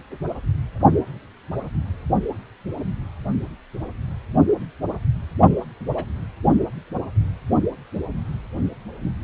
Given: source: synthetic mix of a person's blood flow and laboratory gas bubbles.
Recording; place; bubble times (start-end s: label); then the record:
Doppler ultrasound of blood flow; precordium
5.80-5.85 s: bubbles
5.95-6.04 s: bubbles
From the record:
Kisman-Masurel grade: 111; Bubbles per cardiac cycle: 1 to 2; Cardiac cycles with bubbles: 1 to 10%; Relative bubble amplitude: barely perceptible (0.100 to 0.250); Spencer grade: 1 (occasional bubble signal discernible with the cardiac motion signal, with majority of cardiac periods free of bubbles); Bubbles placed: only in the low amplitude regions of the cardiac cycle